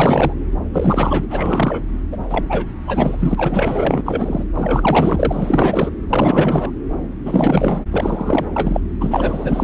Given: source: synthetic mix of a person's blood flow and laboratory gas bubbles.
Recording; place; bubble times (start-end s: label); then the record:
Doppler ultrasound of blood flow; subclavian vein
0.00-0.33 s: bubbles
0.72-1.27 s: bubbles
1.30-1.83 s: bubbles
2.11-2.17 s: bubbles
2.29-2.45 s: bubbles
2.49-2.65 s: bubbles
2.87-4.03 s: bubbles
4.05-4.44 s: bubbles
4.56-5.92 s: bubbles
6.10-6.71 s: bubbles
7.25-7.81 s: bubbles
7.92-8.48 s: bubbles
8.56-8.80 s: bubbles
9.00-9.64 s: bubbles
From the record:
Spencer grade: 4 (maximum detectable bubble signal sounding continuously throughout systole and diastole of every cardiac period, and overriding the amplitude of the normal cardiac signals); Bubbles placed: anywhere in the cardiac cycle